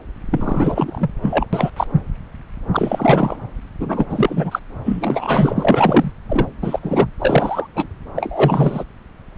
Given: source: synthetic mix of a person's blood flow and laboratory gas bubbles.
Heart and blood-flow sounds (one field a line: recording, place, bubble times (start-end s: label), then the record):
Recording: Doppler ultrasound of blood flow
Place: subclavian vein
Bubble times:
0.30-1.10 s: bubbles
1.22-1.46 s: bubbles
1.53-1.71 s: bubbles
1.76-1.87 s: bubbles
2.73-3.36 s: bubbles
3.79-4.06 s: bubbles
4.09-4.59 s: bubbles
4.85-6.11 s: bubbles
6.29-6.47 s: bubbles
6.61-6.79 s: bubbles
6.83-7.07 s: bubbles
7.19-7.67 s: bubbles
7.75-7.86 s: bubbles
8.15-8.84 s: bubbles
From the record:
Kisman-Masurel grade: 333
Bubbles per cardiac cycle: rolling drumbeat, 9 or more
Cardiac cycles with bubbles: 50 to 99%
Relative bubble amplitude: loud (0.450 to 0.775)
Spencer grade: 3 (all of the cardiac periods contain showers or single bubble signals, but not dominating or overriding the cardiac motion signals)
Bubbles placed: anywhere in the cardiac cycle